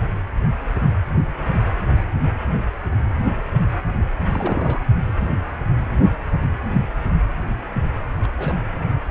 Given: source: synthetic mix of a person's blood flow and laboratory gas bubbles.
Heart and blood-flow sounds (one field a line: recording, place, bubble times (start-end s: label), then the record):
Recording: Doppler ultrasound of blood flow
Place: precordium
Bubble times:
4.30-4.85 s: bubbles
8.23-8.27 s: bubbles
8.38-8.62 s: bubbles
From the record:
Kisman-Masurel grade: 221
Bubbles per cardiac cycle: several, 3 to 8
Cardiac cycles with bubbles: 10 to 50%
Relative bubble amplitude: barely perceptible (0.100 to 0.250)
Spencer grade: 2 (many but less than half of the cardiac periods contain bubble signals, singularly or in groups)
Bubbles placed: anywhere in the cardiac cycle